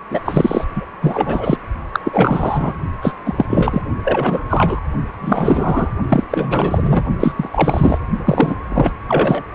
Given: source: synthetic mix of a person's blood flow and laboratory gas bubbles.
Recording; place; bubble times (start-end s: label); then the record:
Doppler ultrasound of blood flow; precordium
0.10-0.20 s: bubbles
0.26-0.65 s: bubbles
0.75-0.85 s: bubbles
1.02-1.57 s: bubbles
1.92-2.00 s: bubbles
2.04-2.74 s: bubbles
3.02-3.12 s: bubbles
3.25-3.45 s: bubbles
3.48-3.82 s: bubbles
4.04-4.41 s: bubbles
4.49-4.79 s: bubbles
5.21-5.90 s: bubbles
6.08-6.24 s: bubbles
6.30-7.04 s: bubbles
7.19-7.32 s: bubbles
7.36-7.49 s: bubbles
7.52-7.98 s: bubbles
8.24-8.57 s: bubbles
8.68-8.92 s: bubbles
9.08-9.42 s: bubbles
From the record:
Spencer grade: 3 (all of the cardiac periods contain showers or single bubble signals, but not dominating or overriding the cardiac motion signals); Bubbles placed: only in the low amplitude regions of the cardiac cycle